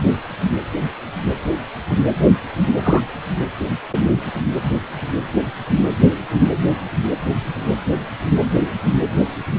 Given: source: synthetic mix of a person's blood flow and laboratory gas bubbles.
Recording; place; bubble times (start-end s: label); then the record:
Doppler ultrasound of blood flow; precordium
2.83-3.02 s: bubbles
From the record:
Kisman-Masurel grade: 113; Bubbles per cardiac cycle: 1 to 2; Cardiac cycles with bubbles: 1 to 10%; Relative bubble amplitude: loud (0.450 to 0.775); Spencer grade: 1 (occasional bubble signal discernible with the cardiac motion signal, with majority of cardiac periods free of bubbles); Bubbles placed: anywhere in the cardiac cycle